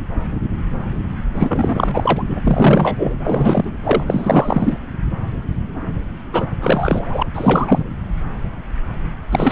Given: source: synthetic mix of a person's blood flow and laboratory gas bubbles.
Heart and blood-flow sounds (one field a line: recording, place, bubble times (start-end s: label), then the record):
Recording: Doppler ultrasound of blood flow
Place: subclavian vein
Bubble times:
1.34-2.22 s: bubbles
2.29-2.40 s: bubbles
2.43-3.14 s: bubbles
3.24-3.71 s: bubbles
3.84-4.03 s: bubbles
4.06-4.77 s: bubbles
6.32-6.46 s: bubbles
6.59-7.22 s: bubbles
7.34-7.84 s: bubbles
9.31-9.52 s: bubbles
From the record:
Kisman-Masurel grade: 333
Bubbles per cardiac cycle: rolling drumbeat, 9 or more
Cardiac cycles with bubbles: 50 to 99%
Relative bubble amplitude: loud (0.450 to 0.775)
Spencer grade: 3 (all of the cardiac periods contain showers or single bubble signals, but not dominating or overriding the cardiac motion signals)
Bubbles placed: anywhere in the cardiac cycle